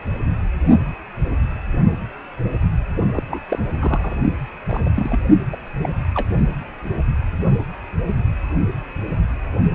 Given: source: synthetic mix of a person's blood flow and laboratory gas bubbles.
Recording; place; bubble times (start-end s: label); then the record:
Doppler ultrasound of blood flow; precordium
3.13-3.23 s: bubbles
3.29-3.40 s: bubbles
3.48-3.58 s: bubbles
3.80-4.17 s: bubbles
4.66-4.89 s: bubbles
4.93-5.24 s: bubbles
5.52-5.57 s: bubbles
5.83-5.89 s: bubbles
6.15-6.28 s: bubbles
From the record:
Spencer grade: 2 (many but less than half of the cardiac periods contain bubble signals, singularly or in groups); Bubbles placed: only in the low amplitude regions of the cardiac cycle